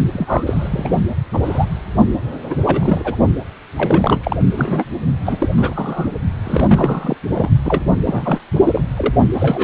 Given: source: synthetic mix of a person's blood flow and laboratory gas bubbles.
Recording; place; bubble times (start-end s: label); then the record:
Doppler ultrasound of blood flow; precordium
0.13-0.98 s: bubbles
1.33-1.40 s: bubbles
1.43-1.66 s: bubbles
2.08-2.13 s: bubbles
2.50-2.55 s: bubbles
2.65-3.16 s: bubbles
3.76-4.20 s: bubbles
4.23-4.36 s: bubbles
4.54-4.84 s: bubbles
5.25-5.49 s: bubbles
5.57-6.14 s: bubbles
6.43-7.17 s: bubbles
7.34-7.49 s: bubbles
7.64-7.91 s: bubbles
7.98-8.40 s: bubbles
8.63-8.81 s: bubbles
8.96-9.15 s: bubbles
9.33-9.63 s: bubbles
From the record:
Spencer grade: 3 (all of the cardiac periods contain showers or single bubble signals, but not dominating or overriding the cardiac motion signals); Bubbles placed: only in the low amplitude regions of the cardiac cycle